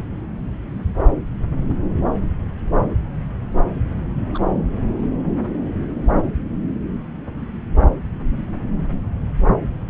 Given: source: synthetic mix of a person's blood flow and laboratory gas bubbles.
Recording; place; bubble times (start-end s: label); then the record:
Doppler ultrasound of blood flow; subclavian vein
4.34-4.39 s: bubbles
From the record:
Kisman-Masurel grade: 112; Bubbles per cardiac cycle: 1 to 2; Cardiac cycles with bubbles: 1 to 10%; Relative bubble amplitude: moderate (0.250 to 0.450); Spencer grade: 1 (occasional bubble signal discernible with the cardiac motion signal, with majority of cardiac periods free of bubbles); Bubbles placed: anywhere in the cardiac cycle